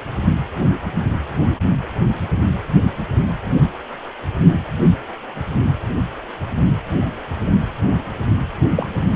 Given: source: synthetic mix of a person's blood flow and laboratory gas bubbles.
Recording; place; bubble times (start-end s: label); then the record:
Doppler ultrasound of blood flow; precordium
8.75-8.87 s: bubbles
From the record:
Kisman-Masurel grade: 212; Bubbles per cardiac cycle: several, 3 to 8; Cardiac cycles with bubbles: 1 to 10%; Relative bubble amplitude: moderate (0.250 to 0.450); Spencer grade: 1 (occasional bubble signal discernible with the cardiac motion signal, with majority of cardiac periods free of bubbles); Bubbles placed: only in the low amplitude regions of the cardiac cycle